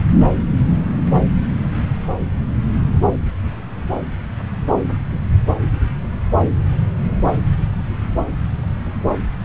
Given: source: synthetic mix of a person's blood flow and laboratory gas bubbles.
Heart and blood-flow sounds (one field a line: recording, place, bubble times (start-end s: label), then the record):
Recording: Doppler ultrasound of blood flow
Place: subclavian vein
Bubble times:
5.10-5.20 s: bubbles
From the record:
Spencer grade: 1 (occasional bubble signal discernible with the cardiac motion signal, with majority of cardiac periods free of bubbles)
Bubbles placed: anywhere in the cardiac cycle